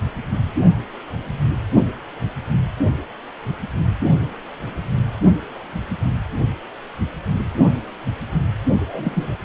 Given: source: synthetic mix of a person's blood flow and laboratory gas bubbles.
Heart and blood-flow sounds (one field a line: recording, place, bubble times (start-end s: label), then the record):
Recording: Doppler ultrasound of blood flow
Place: precordium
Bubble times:
8.79-9.36 s: bubbles
From the record:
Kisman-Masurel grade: 212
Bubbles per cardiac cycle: several, 3 to 8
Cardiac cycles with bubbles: 1 to 10%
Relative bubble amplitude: moderate (0.250 to 0.450)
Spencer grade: 1 (occasional bubble signal discernible with the cardiac motion signal, with majority of cardiac periods free of bubbles)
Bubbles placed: only in the low amplitude regions of the cardiac cycle